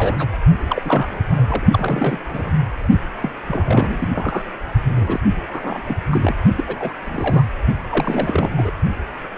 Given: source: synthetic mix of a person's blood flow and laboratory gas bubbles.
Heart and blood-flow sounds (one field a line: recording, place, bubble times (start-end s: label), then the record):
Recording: Doppler ultrasound of blood flow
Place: precordium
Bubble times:
0.00-0.28 s: bubbles
0.69-1.24 s: bubbles
1.28-1.67 s: bubbles
1.72-2.19 s: bubbles
2.29-2.52 s: bubbles
3.22-3.31 s: bubbles
3.47-4.08 s: bubbles
4.14-4.44 s: bubbles
4.96-5.20 s: bubbles
5.48-5.82 s: bubbles
5.87-5.97 s: bubbles
6.11-6.35 s: bubbles
6.55-6.64 s: bubbles
6.67-6.77 s: bubbles
6.79-6.91 s: bubbles
7.05-7.43 s: bubbles
7.90-8.49 s: bubbles
8.57-8.72 s: bubbles
From the record:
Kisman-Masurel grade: 342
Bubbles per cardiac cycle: rolling drumbeat, 9 or more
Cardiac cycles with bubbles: 100%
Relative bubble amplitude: moderate (0.250 to 0.450)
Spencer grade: 3 (all of the cardiac periods contain showers or single bubble signals, but not dominating or overriding the cardiac motion signals)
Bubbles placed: only in the low amplitude regions of the cardiac cycle